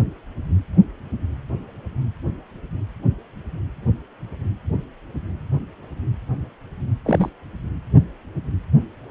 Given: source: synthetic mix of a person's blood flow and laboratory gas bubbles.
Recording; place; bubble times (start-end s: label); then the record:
Doppler ultrasound of blood flow; precordium
7.05-7.29 s: bubbles
From the record:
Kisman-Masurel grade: 112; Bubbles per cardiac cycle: 1 to 2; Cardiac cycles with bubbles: 1 to 10%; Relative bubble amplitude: moderate (0.250 to 0.450); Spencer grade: 1 (occasional bubble signal discernible with the cardiac motion signal, with majority of cardiac periods free of bubbles); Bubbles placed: anywhere in the cardiac cycle